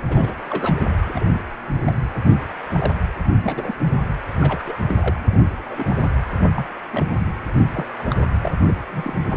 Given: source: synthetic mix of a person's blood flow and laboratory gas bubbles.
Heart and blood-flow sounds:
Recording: Doppler ultrasound of blood flow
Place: precordium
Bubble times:
0.08-0.33 s: bubbles
0.48-0.75 s: bubbles
1.05-1.42 s: bubbles
1.86-1.97 s: bubbles
2.21-2.37 s: bubbles
2.67-2.94 s: bubbles
3.43-3.75 s: bubbles
4.41-4.75 s: bubbles
4.86-4.95 s: bubbles
5.01-5.20 s: bubbles
5.29-5.43 s: bubbles
5.68-6.05 s: bubbles
6.55-6.66 s: bubbles
6.90-7.27 s: bubbles
7.54-7.64 s: bubbles
7.72-7.86 s: bubbles
7.99-8.05 s: bubbles
8.10-8.24 s: bubbles
8.41-8.52 s: bubbles
8.67-8.72 s: bubbles
8.92-9.14 s: bubbles
9.30-9.37 s: bubbles
From the record:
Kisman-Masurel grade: 242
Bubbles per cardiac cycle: several, 3 to 8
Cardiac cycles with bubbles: 100%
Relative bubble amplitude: moderate (0.250 to 0.450)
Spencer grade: 3 (all of the cardiac periods contain showers or single bubble signals, but not dominating or overriding the cardiac motion signals)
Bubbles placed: anywhere in the cardiac cycle

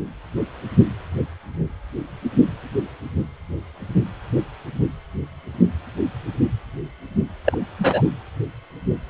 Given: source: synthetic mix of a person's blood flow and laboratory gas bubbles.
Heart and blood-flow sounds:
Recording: Doppler ultrasound of blood flow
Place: precordium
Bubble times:
7.45-7.58 s: bubbles
7.78-8.02 s: bubbles
From the record:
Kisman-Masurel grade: 113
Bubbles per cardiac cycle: 1 to 2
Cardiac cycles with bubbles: 1 to 10%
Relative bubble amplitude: loud (0.450 to 0.775)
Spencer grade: 1 (occasional bubble signal discernible with the cardiac motion signal, with majority of cardiac periods free of bubbles)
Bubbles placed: anywhere in the cardiac cycle

